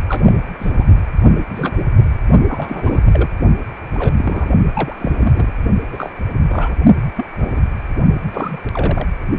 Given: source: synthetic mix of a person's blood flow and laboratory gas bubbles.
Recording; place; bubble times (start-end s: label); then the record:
Doppler ultrasound of blood flow; precordium
0.08-0.33 s: bubbles
0.59-0.88 s: bubbles
1.49-1.77 s: bubbles
2.48-3.02 s: bubbles
3.06-3.29 s: bubbles
3.94-4.51 s: bubbles
4.73-4.96 s: bubbles
4.98-5.52 s: bubbles
5.92-6.12 s: bubbles
6.48-6.77 s: bubbles
7.16-7.26 s: bubbles
7.40-7.61 s: bubbles
8.31-8.57 s: bubbles
8.72-9.08 s: bubbles
From the record:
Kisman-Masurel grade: 232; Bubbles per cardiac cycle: several, 3 to 8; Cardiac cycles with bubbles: 50 to 99%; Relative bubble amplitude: moderate (0.250 to 0.450); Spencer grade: 3 (all of the cardiac periods contain showers or single bubble signals, but not dominating or overriding the cardiac motion signals); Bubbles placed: only in the low amplitude regions of the cardiac cycle